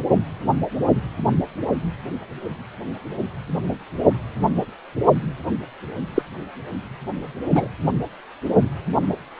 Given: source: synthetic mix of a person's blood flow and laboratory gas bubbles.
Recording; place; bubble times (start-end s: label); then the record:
Doppler ultrasound of blood flow; precordium
6.15-6.22 s: bubbles
7.52-7.67 s: bubbles
From the record:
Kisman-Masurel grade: 123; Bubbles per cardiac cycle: 1 to 2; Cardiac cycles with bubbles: 10 to 50%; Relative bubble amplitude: loud (0.450 to 0.775); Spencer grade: 2 (many but less than half of the cardiac periods contain bubble signals, singularly or in groups); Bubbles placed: only in the low amplitude regions of the cardiac cycle